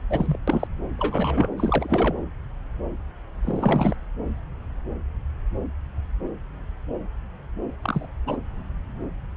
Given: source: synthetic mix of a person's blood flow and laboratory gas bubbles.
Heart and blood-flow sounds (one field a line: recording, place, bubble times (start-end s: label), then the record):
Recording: Doppler ultrasound of blood flow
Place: subclavian vein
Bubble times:
0.09-0.39 s: bubbles
0.47-0.67 s: bubbles
0.97-1.49 s: bubbles
1.58-2.15 s: bubbles
3.44-3.94 s: bubbles
7.82-8.07 s: bubbles
8.26-8.37 s: bubbles
From the record:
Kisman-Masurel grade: 221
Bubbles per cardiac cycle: several, 3 to 8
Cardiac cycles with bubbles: 10 to 50%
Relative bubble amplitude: barely perceptible (0.100 to 0.250)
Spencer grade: 2 (many but less than half of the cardiac periods contain bubble signals, singularly or in groups)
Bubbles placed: anywhere in the cardiac cycle